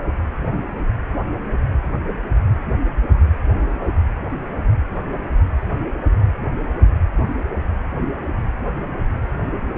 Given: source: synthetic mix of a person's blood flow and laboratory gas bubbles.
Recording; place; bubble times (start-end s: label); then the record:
Doppler ultrasound of blood flow; precordium
no bubbles
From the record:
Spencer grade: 0 (complete lack of bubble signals)